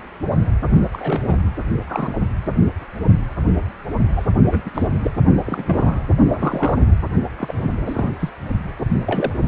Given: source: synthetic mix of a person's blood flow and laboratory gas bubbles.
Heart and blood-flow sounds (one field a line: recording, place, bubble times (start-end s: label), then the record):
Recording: Doppler ultrasound of blood flow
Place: precordium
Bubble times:
0.93-1.22 s: bubbles
1.27-1.35 s: bubbles
1.86-2.30 s: bubbles
4.16-4.24 s: bubbles
4.51-4.62 s: bubbles
4.64-4.70 s: bubbles
4.74-4.88 s: bubbles
4.91-4.96 s: bubbles
5.03-5.10 s: bubbles
5.45-6.00 s: bubbles
6.31-6.75 s: bubbles
6.79-6.87 s: bubbles
7.38-7.54 s: bubbles
7.86-8.12 s: bubbles
8.19-8.29 s: bubbles
9.06-9.32 s: bubbles
9.45-9.48 s: bubbles
From the record:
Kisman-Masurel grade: 232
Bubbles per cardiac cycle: several, 3 to 8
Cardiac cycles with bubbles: 50 to 99%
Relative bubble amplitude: moderate (0.250 to 0.450)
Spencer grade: 3 (all of the cardiac periods contain showers or single bubble signals, but not dominating or overriding the cardiac motion signals)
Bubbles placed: only in the low amplitude regions of the cardiac cycle